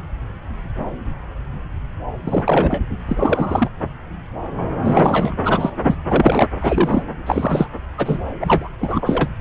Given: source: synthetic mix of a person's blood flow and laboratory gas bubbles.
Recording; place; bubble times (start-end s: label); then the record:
Doppler ultrasound of blood flow; subclavian vein
2.25-2.82 s: bubbles
3.08-3.69 s: bubbles
4.84-5.34 s: bubbles
5.43-5.70 s: bubbles
5.83-5.96 s: bubbles
6.08-6.50 s: bubbles
6.60-7.04 s: bubbles
7.26-7.70 s: bubbles
7.96-8.19 s: bubbles
8.40-8.70 s: bubbles
8.79-9.29 s: bubbles
From the record:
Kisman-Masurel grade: 233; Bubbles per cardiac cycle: several, 3 to 8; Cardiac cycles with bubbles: 50 to 99%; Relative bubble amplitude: loud (0.450 to 0.775); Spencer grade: 3 (all of the cardiac periods contain showers or single bubble signals, but not dominating or overriding the cardiac motion signals); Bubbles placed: anywhere in the cardiac cycle